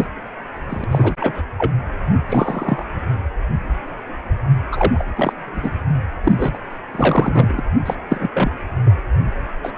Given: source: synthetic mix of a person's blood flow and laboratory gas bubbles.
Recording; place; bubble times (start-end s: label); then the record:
Doppler ultrasound of blood flow; precordium
0.00-0.06 s: bubbles
0.69-0.84 s: bubbles
0.91-1.15 s: bubbles
1.20-1.44 s: bubbles
1.57-1.73 s: bubbles
2.29-2.84 s: bubbles
4.71-5.05 s: bubbles
5.16-5.33 s: bubbles
5.54-5.79 s: bubbles
6.24-6.58 s: bubbles
6.93-7.63 s: bubbles
7.86-7.96 s: bubbles
8.09-8.29 s: bubbles
8.34-8.50 s: bubbles
8.86-8.92 s: bubbles
9.63-9.72 s: bubbles
From the record:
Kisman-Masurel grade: 233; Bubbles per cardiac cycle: several, 3 to 8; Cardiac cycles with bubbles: 50 to 99%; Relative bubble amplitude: loud (0.450 to 0.775); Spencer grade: 3 (all of the cardiac periods contain showers or single bubble signals, but not dominating or overriding the cardiac motion signals); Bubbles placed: anywhere in the cardiac cycle